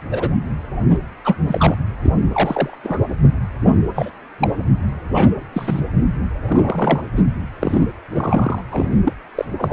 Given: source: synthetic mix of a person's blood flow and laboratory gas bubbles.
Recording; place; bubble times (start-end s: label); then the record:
Doppler ultrasound of blood flow; precordium
0.11-0.30 s: bubbles
0.89-0.99 s: bubbles
1.24-1.35 s: bubbles
1.48-1.76 s: bubbles
2.04-2.12 s: bubbles
2.31-2.78 s: bubbles
2.83-3.00 s: bubbles
3.95-4.11 s: bubbles
4.40-4.52 s: bubbles
5.13-5.28 s: bubbles
5.52-5.81 s: bubbles
6.48-7.03 s: bubbles
7.16-7.22 s: bubbles
7.60-7.85 s: bubbles
8.10-8.61 s: bubbles
8.71-8.96 s: bubbles
9.04-9.13 s: bubbles
9.36-9.45 s: bubbles
9.58-9.73 s: bubbles
From the record:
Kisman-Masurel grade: 242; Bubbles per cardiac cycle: several, 3 to 8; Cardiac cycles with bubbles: 100%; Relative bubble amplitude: moderate (0.250 to 0.450); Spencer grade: 3 (all of the cardiac periods contain showers or single bubble signals, but not dominating or overriding the cardiac motion signals); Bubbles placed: anywhere in the cardiac cycle